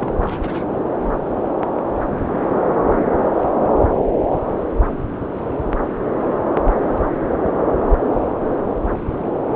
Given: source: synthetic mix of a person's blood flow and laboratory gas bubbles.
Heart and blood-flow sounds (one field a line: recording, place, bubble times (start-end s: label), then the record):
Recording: Doppler ultrasound of blood flow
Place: subclavian vein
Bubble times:
0.00-0.13 s: bubbles
0.21-0.65 s: bubbles
From the record:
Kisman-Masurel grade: 211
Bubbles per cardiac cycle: several, 3 to 8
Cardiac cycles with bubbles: 1 to 10%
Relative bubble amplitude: barely perceptible (0.100 to 0.250)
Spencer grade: 1 (occasional bubble signal discernible with the cardiac motion signal, with majority of cardiac periods free of bubbles)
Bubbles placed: anywhere in the cardiac cycle